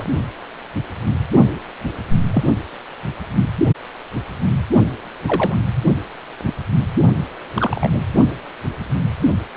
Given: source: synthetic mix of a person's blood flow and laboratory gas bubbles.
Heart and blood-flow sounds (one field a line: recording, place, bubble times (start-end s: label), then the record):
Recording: Doppler ultrasound of blood flow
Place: precordium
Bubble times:
0.00-0.05 s: bubbles
2.33-2.43 s: bubbles
5.26-5.55 s: bubbles
6.44-6.52 s: bubbles
7.54-8.07 s: bubbles
From the record:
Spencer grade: 2 (many but less than half of the cardiac periods contain bubble signals, singularly or in groups)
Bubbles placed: only in the low amplitude regions of the cardiac cycle